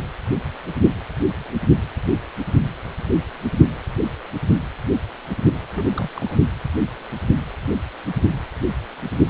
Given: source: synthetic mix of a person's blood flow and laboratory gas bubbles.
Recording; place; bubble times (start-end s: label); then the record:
Doppler ultrasound of blood flow; precordium
5.74-5.86 s: bubbles
5.92-6.10 s: bubbles
6.17-6.38 s: bubbles
From the record:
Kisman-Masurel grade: 221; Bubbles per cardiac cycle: several, 3 to 8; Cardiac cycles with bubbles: 10 to 50%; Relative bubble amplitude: barely perceptible (0.100 to 0.250); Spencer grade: 2 (many but less than half of the cardiac periods contain bubble signals, singularly or in groups); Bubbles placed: anywhere in the cardiac cycle